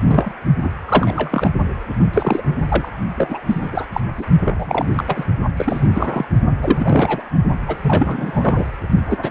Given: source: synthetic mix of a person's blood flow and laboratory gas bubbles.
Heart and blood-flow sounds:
Doppler ultrasound of blood flow; precordium
0.07-0.31 s: bubbles
0.61-0.72 s: bubbles
0.87-1.54 s: bubbles
2.13-2.43 s: bubbles
2.69-2.89 s: bubbles
3.16-3.41 s: bubbles
3.46-3.85 s: bubbles
3.93-4.00 s: bubbles
4.17-4.25 s: bubbles
4.45-5.04 s: bubbles
5.06-5.24 s: bubbles
5.56-5.88 s: bubbles
5.94-6.25 s: bubbles
6.61-7.23 s: bubbles
7.66-7.76 s: bubbles
7.82-8.65 s: bubbles
9.09-9.19 s: bubbles
9.22-9.30 s: bubbles
From the record:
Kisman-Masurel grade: 342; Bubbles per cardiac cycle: rolling drumbeat, 9 or more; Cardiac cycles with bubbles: 100%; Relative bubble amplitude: moderate (0.250 to 0.450); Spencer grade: 3 (all of the cardiac periods contain showers or single bubble signals, but not dominating or overriding the cardiac motion signals); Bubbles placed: only in the low amplitude regions of the cardiac cycle

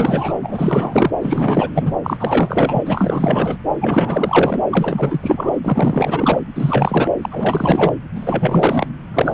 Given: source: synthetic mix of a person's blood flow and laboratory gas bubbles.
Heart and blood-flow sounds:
Doppler ultrasound of blood flow; subclavian vein
0.00-0.37 s: bubbles
0.43-1.12 s: bubbles
1.21-1.70 s: bubbles
1.75-1.92 s: bubbles
2.03-3.57 s: bubbles
3.80-4.65 s: bubbles
4.71-5.54 s: bubbles
5.63-6.40 s: bubbles
6.55-7.12 s: bubbles
7.21-7.94 s: bubbles
8.15-8.87 s: bubbles
9.13-9.34 s: bubbles
From the record:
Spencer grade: 4 (maximum detectable bubble signal sounding continuously throughout systole and diastole of every cardiac period, and overriding the amplitude of the normal cardiac signals); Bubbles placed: anywhere in the cardiac cycle

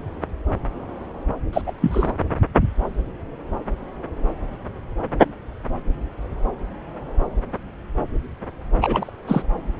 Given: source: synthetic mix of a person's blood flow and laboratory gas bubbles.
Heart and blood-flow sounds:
Doppler ultrasound of blood flow; subclavian vein
1.52-1.61 s: bubbles
1.66-1.72 s: bubbles
1.81-2.12 s: bubbles
8.81-9.11 s: bubbles
9.27-9.43 s: bubbles
From the record:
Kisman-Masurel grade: 212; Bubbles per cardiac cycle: several, 3 to 8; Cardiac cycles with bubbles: 1 to 10%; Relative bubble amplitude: moderate (0.250 to 0.450); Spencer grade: 1 (occasional bubble signal discernible with the cardiac motion signal, with majority of cardiac periods free of bubbles); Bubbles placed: anywhere in the cardiac cycle

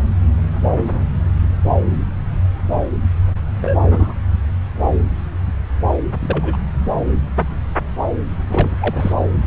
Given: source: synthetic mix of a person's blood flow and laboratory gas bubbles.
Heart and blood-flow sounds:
Doppler ultrasound of blood flow; subclavian vein
3.62-3.77 s: bubbles
3.90-4.13 s: bubbles
6.20-6.57 s: bubbles
8.50-8.75 s: bubbles
8.80-9.12 s: bubbles
From the record:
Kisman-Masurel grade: 232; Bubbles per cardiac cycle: several, 3 to 8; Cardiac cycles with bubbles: 50 to 99%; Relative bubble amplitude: moderate (0.250 to 0.450); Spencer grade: 3 (all of the cardiac periods contain showers or single bubble signals, but not dominating or overriding the cardiac motion signals); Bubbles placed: anywhere in the cardiac cycle

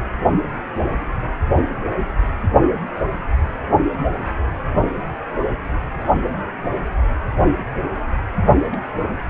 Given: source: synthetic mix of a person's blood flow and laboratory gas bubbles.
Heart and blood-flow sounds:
Doppler ultrasound of blood flow; precordium
8.71-8.81 s: bubbles
From the record:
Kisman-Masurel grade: 121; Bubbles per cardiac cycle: 1 to 2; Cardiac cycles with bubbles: 10 to 50%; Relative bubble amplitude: barely perceptible (0.100 to 0.250); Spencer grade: 2 (many but less than half of the cardiac periods contain bubble signals, singularly or in groups); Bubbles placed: only in the low amplitude regions of the cardiac cycle

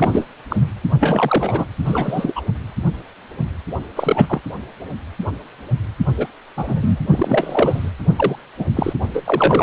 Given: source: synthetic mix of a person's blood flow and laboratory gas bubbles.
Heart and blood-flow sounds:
Doppler ultrasound of blood flow; precordium
0.00-0.26 s: bubbles
0.49-0.71 s: bubbles
1.00-1.65 s: bubbles
1.85-2.32 s: bubbles
2.35-2.42 s: bubbles
3.96-4.41 s: bubbles
6.17-6.27 s: bubbles
6.56-7.00 s: bubbles
7.10-7.91 s: bubbles
8.04-8.41 s: bubbles
8.58-8.66 s: bubbles
8.75-8.93 s: bubbles
9.14-9.63 s: bubbles
From the record:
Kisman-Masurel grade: 233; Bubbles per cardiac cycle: several, 3 to 8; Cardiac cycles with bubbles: 50 to 99%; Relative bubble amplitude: loud (0.450 to 0.775); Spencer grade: 3 (all of the cardiac periods contain showers or single bubble signals, but not dominating or overriding the cardiac motion signals); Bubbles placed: anywhere in the cardiac cycle

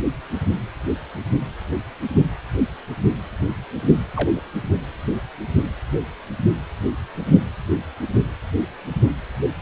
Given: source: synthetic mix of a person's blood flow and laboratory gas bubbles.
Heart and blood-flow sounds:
Doppler ultrasound of blood flow; precordium
4.16-4.30 s: bubbles
4.36-4.40 s: bubbles
From the record:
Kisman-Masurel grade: 121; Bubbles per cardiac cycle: 1 to 2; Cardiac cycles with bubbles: 10 to 50%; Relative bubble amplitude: barely perceptible (0.100 to 0.250); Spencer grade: 2 (many but less than half of the cardiac periods contain bubble signals, singularly or in groups); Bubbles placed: anywhere in the cardiac cycle

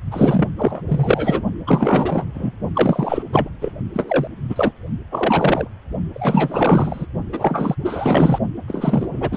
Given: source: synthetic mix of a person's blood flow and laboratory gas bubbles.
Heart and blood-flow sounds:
Doppler ultrasound of blood flow; precordium
0.11-0.49 s: bubbles
0.57-0.81 s: bubbles
0.88-1.43 s: bubbles
1.67-2.25 s: bubbles
2.35-2.52 s: bubbles
2.75-3.23 s: bubbles
3.32-3.49 s: bubbles
3.61-3.72 s: bubbles
3.94-4.28 s: bubbles
4.49-4.71 s: bubbles
5.11-5.68 s: bubbles
6.14-7.05 s: bubbles
7.32-7.76 s: bubbles
7.85-8.38 s: bubbles
8.67-9.37 s: bubbles
From the record:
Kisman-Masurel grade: 444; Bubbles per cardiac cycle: continuous sound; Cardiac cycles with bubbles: 100%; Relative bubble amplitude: maximal (0.775 to 0.999); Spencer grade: 4 (maximum detectable bubble signal sounding continuously throughout systole and diastole of every cardiac period, and overriding the amplitude of the normal cardiac signals); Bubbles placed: only in the low amplitude regions of the cardiac cycle

